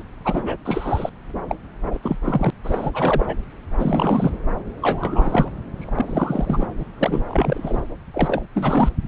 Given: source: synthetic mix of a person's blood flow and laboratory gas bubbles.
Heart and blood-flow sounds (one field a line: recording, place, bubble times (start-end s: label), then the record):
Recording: Doppler ultrasound of blood flow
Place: subclavian vein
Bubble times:
0.00-0.02 s: bubbles
0.24-0.56 s: bubbles
0.65-1.09 s: bubbles
1.49-1.55 s: bubbles
1.86-1.99 s: bubbles
2.03-2.17 s: bubbles
2.24-2.50 s: bubbles
2.63-2.91 s: bubbles
2.93-3.36 s: bubbles
3.79-4.38 s: bubbles
4.82-5.50 s: bubbles
5.78-6.70 s: bubbles
6.79-6.85 s: bubbles
6.98-7.21 s: bubbles
7.29-7.83 s: bubbles
8.14-8.41 s: bubbles
8.54-8.89 s: bubbles
From the record:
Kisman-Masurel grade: 342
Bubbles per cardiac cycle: rolling drumbeat, 9 or more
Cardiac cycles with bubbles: 100%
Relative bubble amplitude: moderate (0.250 to 0.450)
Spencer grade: 3 (all of the cardiac periods contain showers or single bubble signals, but not dominating or overriding the cardiac motion signals)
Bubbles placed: anywhere in the cardiac cycle